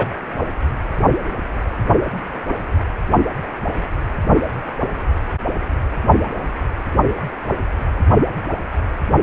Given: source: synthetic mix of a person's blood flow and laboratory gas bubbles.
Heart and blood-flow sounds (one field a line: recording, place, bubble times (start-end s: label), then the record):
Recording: Doppler ultrasound of blood flow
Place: precordium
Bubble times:
0.00-0.06 s: bubbles
From the record:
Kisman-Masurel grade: 213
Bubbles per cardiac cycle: several, 3 to 8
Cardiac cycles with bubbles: 1 to 10%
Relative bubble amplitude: loud (0.450 to 0.775)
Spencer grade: 1 (occasional bubble signal discernible with the cardiac motion signal, with majority of cardiac periods free of bubbles)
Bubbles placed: only in the low amplitude regions of the cardiac cycle